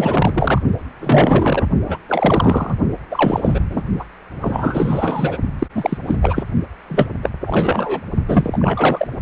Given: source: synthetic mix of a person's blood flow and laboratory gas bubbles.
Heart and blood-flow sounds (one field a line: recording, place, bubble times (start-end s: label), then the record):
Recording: Doppler ultrasound of blood flow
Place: precordium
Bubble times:
0.00-0.61 s: bubbles
0.99-1.66 s: bubbles
1.84-1.97 s: bubbles
2.08-2.75 s: bubbles
3.10-3.60 s: bubbles
3.69-3.83 s: bubbles
3.99-4.04 s: bubbles
4.41-5.38 s: bubbles
5.59-5.67 s: bubbles
5.75-5.98 s: bubbles
6.07-6.16 s: bubbles
6.22-6.44 s: bubbles
6.89-7.09 s: bubbles
7.23-7.29 s: bubbles
7.40-8.01 s: bubbles
8.28-9.08 s: bubbles
From the record:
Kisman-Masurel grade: 343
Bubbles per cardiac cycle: rolling drumbeat, 9 or more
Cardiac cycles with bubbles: 100%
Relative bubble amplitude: loud (0.450 to 0.775)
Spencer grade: 3 (all of the cardiac periods contain showers or single bubble signals, but not dominating or overriding the cardiac motion signals)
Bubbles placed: only in the low amplitude regions of the cardiac cycle